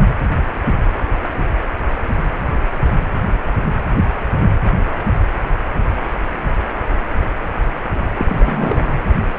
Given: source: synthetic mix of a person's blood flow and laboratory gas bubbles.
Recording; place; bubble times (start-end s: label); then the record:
Doppler ultrasound of blood flow; precordium
8.19-8.95 s: bubbles
From the record:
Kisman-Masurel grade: 212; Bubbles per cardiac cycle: several, 3 to 8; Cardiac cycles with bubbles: 1 to 10%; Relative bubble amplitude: moderate (0.250 to 0.450); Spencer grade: 1 (occasional bubble signal discernible with the cardiac motion signal, with majority of cardiac periods free of bubbles); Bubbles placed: anywhere in the cardiac cycle